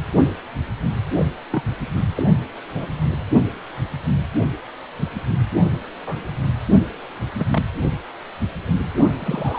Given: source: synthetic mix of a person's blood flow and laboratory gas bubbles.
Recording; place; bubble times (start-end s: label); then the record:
Doppler ultrasound of blood flow; precordium
1.15-1.25 s: bubbles
1.50-1.63 s: bubbles
2.15-2.23 s: bubbles
2.74-2.86 s: bubbles
6.07-6.16 s: bubbles
7.39-7.46 s: bubbles
7.49-7.64 s: bubbles
9.19-9.59 s: bubbles
From the record:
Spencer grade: 2 (many but less than half of the cardiac periods contain bubble signals, singularly or in groups); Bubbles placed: only in the low amplitude regions of the cardiac cycle